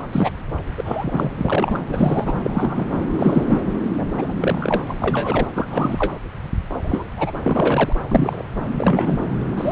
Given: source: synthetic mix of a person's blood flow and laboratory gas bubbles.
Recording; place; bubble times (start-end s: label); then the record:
Doppler ultrasound of blood flow; subclavian vein
0.00-0.09 s: bubbles
0.11-0.30 s: bubbles
0.77-1.30 s: bubbles
1.36-1.79 s: bubbles
1.89-2.34 s: bubbles
2.44-2.86 s: bubbles
3.19-3.44 s: bubbles
3.46-3.65 s: bubbles
3.97-4.05 s: bubbles
4.18-4.36 s: bubbles
4.41-4.81 s: bubbles
4.86-4.94 s: bubbles
5.00-5.47 s: bubbles
5.55-5.66 s: bubbles
5.70-6.14 s: bubbles
6.74-6.80 s: bubbles
6.85-7.08 s: bubbles
7.16-7.32 s: bubbles
7.44-7.93 s: bubbles
8.07-8.42 s: bubbles
8.78-9.18 s: bubbles
9.57-9.72 s: bubbles
From the record:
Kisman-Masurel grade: 243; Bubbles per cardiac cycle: several, 3 to 8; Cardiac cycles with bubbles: 100%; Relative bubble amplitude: loud (0.450 to 0.775); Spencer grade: 3 (all of the cardiac periods contain showers or single bubble signals, but not dominating or overriding the cardiac motion signals); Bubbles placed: anywhere in the cardiac cycle